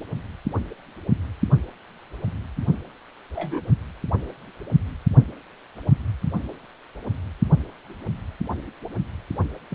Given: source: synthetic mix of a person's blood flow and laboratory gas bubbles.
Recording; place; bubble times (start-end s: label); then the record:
Doppler ultrasound of blood flow; precordium
3.35-3.61 s: bubbles
9.70-9.75 s: bubbles
From the record:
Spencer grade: 2 (many but less than half of the cardiac periods contain bubble signals, singularly or in groups); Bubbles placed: only in the low amplitude regions of the cardiac cycle